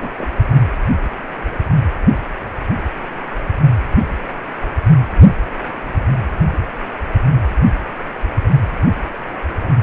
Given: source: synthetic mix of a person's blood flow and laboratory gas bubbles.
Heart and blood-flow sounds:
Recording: Doppler ultrasound of blood flow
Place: precordium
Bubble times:
0.00-0.10 s: bubbles
0.18-0.27 s: bubbles
0.49-0.63 s: bubbles
From the record:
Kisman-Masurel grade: 211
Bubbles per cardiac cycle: several, 3 to 8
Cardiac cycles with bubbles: 1 to 10%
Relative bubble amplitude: barely perceptible (0.100 to 0.250)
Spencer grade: 1 (occasional bubble signal discernible with the cardiac motion signal, with majority of cardiac periods free of bubbles)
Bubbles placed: anywhere in the cardiac cycle

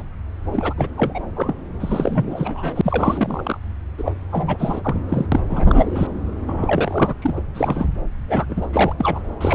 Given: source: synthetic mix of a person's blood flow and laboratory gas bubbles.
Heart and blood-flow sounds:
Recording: Doppler ultrasound of blood flow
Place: subclavian vein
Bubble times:
0.00-0.03 s: bubbles
0.53-0.73 s: bubbles
0.77-0.88 s: bubbles
0.97-1.23 s: bubbles
1.35-1.54 s: bubbles
1.80-3.58 s: bubbles
3.98-4.12 s: bubbles
4.32-4.81 s: bubbles
4.84-5.02 s: bubbles
5.09-5.26 s: bubbles
5.32-5.40 s: bubbles
5.49-6.07 s: bubbles
6.49-7.14 s: bubbles
7.21-7.33 s: bubbles
7.36-7.41 s: bubbles
7.54-7.89 s: bubbles
8.28-8.46 s: bubbles
8.49-8.67 s: bubbles
8.72-8.93 s: bubbles
8.97-9.20 s: bubbles
9.40-9.55 s: bubbles
From the record:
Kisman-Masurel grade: 342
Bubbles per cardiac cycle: rolling drumbeat, 9 or more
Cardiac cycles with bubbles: 100%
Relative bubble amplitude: moderate (0.250 to 0.450)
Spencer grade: 3 (all of the cardiac periods contain showers or single bubble signals, but not dominating or overriding the cardiac motion signals)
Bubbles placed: anywhere in the cardiac cycle

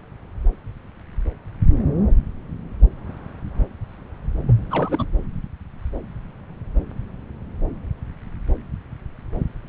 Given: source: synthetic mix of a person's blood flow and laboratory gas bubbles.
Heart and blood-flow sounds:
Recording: Doppler ultrasound of blood flow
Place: subclavian vein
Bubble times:
4.48-4.53 s: bubbles
4.70-5.06 s: bubbles
From the record:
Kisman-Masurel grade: 211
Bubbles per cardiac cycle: several, 3 to 8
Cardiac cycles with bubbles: 1 to 10%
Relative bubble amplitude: barely perceptible (0.100 to 0.250)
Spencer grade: 1 (occasional bubble signal discernible with the cardiac motion signal, with majority of cardiac periods free of bubbles)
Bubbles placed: anywhere in the cardiac cycle

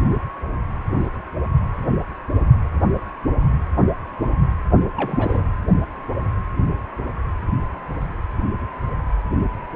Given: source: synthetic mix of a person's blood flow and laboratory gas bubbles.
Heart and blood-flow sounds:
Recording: Doppler ultrasound of blood flow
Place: precordium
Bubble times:
4.96-5.43 s: bubbles
From the record:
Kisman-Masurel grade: 212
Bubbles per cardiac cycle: several, 3 to 8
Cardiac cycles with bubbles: 1 to 10%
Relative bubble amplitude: moderate (0.250 to 0.450)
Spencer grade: 1 (occasional bubble signal discernible with the cardiac motion signal, with majority of cardiac periods free of bubbles)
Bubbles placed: anywhere in the cardiac cycle

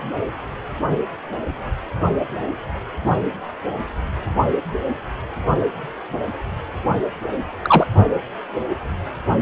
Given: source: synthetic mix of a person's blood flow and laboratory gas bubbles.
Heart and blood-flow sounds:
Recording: Doppler ultrasound of blood flow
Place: precordium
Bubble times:
7.62-7.86 s: bubbles
From the record:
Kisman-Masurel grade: 113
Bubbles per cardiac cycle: 1 to 2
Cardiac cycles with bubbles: 1 to 10%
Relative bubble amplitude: loud (0.450 to 0.775)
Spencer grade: 1 (occasional bubble signal discernible with the cardiac motion signal, with majority of cardiac periods free of bubbles)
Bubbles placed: only in the low amplitude regions of the cardiac cycle

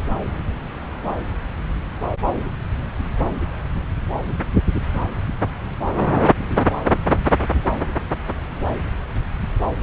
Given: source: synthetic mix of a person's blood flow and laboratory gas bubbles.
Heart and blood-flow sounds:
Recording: Doppler ultrasound of blood flow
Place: subclavian vein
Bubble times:
no bubbles
From the record:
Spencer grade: 0 (complete lack of bubble signals)

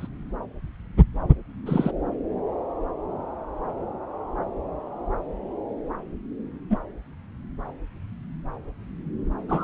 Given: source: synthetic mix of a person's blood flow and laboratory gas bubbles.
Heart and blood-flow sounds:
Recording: Doppler ultrasound of blood flow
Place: subclavian vein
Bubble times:
0.00-0.07 s: bubbles
1.66-1.91 s: bubbles
6.70-6.78 s: bubbles
9.48-9.64 s: bubbles
From the record:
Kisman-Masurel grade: 122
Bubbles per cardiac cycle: 1 to 2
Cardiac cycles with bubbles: 10 to 50%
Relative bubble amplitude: moderate (0.250 to 0.450)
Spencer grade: 2 (many but less than half of the cardiac periods contain bubble signals, singularly or in groups)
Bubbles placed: anywhere in the cardiac cycle

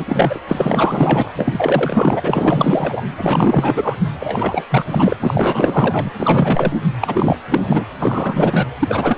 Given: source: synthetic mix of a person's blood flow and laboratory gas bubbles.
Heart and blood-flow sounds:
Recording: Doppler ultrasound of blood flow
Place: precordium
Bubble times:
0.00-0.39 s: bubbles
0.48-1.31 s: bubbles
1.36-3.02 s: bubbles
3.17-3.96 s: bubbles
4.20-5.17 s: bubbles
5.21-6.12 s: bubbles
6.20-6.74 s: bubbles
7.00-7.37 s: bubbles
7.47-7.85 s: bubbles
7.99-8.68 s: bubbles
8.79-9.18 s: bubbles
From the record:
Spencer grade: 4 (maximum detectable bubble signal sounding continuously throughout systole and diastole of every cardiac period, and overriding the amplitude of the normal cardiac signals)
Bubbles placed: anywhere in the cardiac cycle

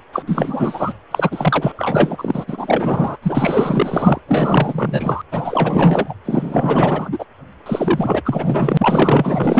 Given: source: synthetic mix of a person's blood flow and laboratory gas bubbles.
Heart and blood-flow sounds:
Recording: Doppler ultrasound of blood flow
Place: precordium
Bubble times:
0.12-0.24 s: bubbles
0.27-0.94 s: bubbles
1.11-1.73 s: bubbles
1.76-2.45 s: bubbles
2.48-3.17 s: bubbles
3.22-4.21 s: bubbles
4.28-5.22 s: bubbles
5.32-6.14 s: bubbles
6.25-7.10 s: bubbles
7.12-7.25 s: bubbles
7.66-8.22 s: bubbles
8.25-9.60 s: bubbles
From the record:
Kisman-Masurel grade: 444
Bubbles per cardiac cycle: continuous sound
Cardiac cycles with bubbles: 100%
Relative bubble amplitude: maximal (0.775 to 0.999)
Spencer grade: 4 (maximum detectable bubble signal sounding continuously throughout systole and diastole of every cardiac period, and overriding the amplitude of the normal cardiac signals)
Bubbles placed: anywhere in the cardiac cycle

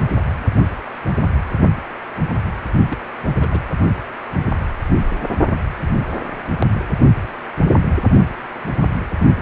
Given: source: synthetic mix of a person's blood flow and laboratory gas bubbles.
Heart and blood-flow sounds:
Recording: Doppler ultrasound of blood flow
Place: precordium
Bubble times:
2.90-2.98 s: bubbles
3.40-3.47 s: bubbles
3.51-3.59 s: bubbles
From the record:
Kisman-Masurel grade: 211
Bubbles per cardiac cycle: several, 3 to 8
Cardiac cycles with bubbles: 1 to 10%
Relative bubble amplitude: barely perceptible (0.100 to 0.250)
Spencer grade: 1 (occasional bubble signal discernible with the cardiac motion signal, with majority of cardiac periods free of bubbles)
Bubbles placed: only in the low amplitude regions of the cardiac cycle

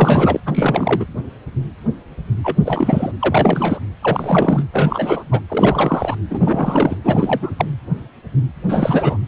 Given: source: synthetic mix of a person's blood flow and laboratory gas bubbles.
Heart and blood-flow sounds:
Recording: Doppler ultrasound of blood flow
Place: precordium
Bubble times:
0.00-0.40 s: bubbles
0.46-1.06 s: bubbles
2.44-2.56 s: bubbles
2.65-3.12 s: bubbles
3.19-3.79 s: bubbles
4.03-4.63 s: bubbles
4.73-5.24 s: bubbles
5.32-5.41 s: bubbles
5.50-6.16 s: bubbles
6.29-6.97 s: bubbles
7.04-7.53 s: bubbles
7.58-7.66 s: bubbles
8.68-9.17 s: bubbles
From the record:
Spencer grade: 3 (all of the cardiac periods contain showers or single bubble signals, but not dominating or overriding the cardiac motion signals)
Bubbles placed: anywhere in the cardiac cycle

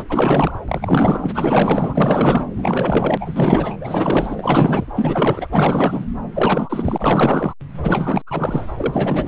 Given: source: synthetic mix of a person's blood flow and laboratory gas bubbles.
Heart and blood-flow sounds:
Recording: Doppler ultrasound of blood flow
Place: subclavian vein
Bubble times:
0.00-0.05 s: bubbles
0.09-0.52 s: bubbles
0.68-1.30 s: bubbles
1.33-2.46 s: bubbles
2.56-3.17 s: bubbles
3.20-3.76 s: bubbles
3.80-4.86 s: bubbles
4.96-5.48 s: bubbles
5.51-6.07 s: bubbles
6.33-7.54 s: bubbles
7.82-8.22 s: bubbles
8.27-8.64 s: bubbles
8.77-9.27 s: bubbles
From the record:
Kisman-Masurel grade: 444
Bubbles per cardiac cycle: continuous sound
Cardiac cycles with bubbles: 100%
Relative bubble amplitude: maximal (0.775 to 0.999)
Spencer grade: 4 (maximum detectable bubble signal sounding continuously throughout systole and diastole of every cardiac period, and overriding the amplitude of the normal cardiac signals)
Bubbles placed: anywhere in the cardiac cycle

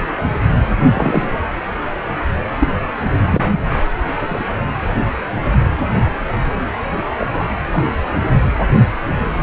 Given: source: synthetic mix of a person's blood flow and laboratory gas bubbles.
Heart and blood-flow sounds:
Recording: Doppler ultrasound of blood flow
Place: precordium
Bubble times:
0.94-1.23 s: bubbles
2.58-2.68 s: bubbles
3.33-3.68 s: bubbles
4.21-4.43 s: bubbles
6.49-6.54 s: bubbles
7.18-7.44 s: bubbles
7.72-7.84 s: bubbles
From the record:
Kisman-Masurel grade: 122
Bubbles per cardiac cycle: 1 to 2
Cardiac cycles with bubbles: 10 to 50%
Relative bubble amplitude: moderate (0.250 to 0.450)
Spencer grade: 2 (many but less than half of the cardiac periods contain bubble signals, singularly or in groups)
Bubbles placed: anywhere in the cardiac cycle

